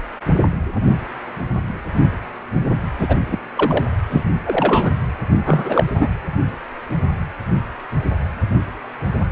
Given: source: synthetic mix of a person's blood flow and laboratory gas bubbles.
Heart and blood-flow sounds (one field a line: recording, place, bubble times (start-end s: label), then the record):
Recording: Doppler ultrasound of blood flow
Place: precordium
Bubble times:
2.98-3.17 s: bubbles
3.30-3.38 s: bubbles
3.55-3.84 s: bubbles
4.10-4.24 s: bubbles
4.45-4.91 s: bubbles
5.46-6.09 s: bubbles
From the record:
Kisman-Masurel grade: 233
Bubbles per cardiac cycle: several, 3 to 8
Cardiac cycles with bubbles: 50 to 99%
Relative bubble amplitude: loud (0.450 to 0.775)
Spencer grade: 3 (all of the cardiac periods contain showers or single bubble signals, but not dominating or overriding the cardiac motion signals)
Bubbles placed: anywhere in the cardiac cycle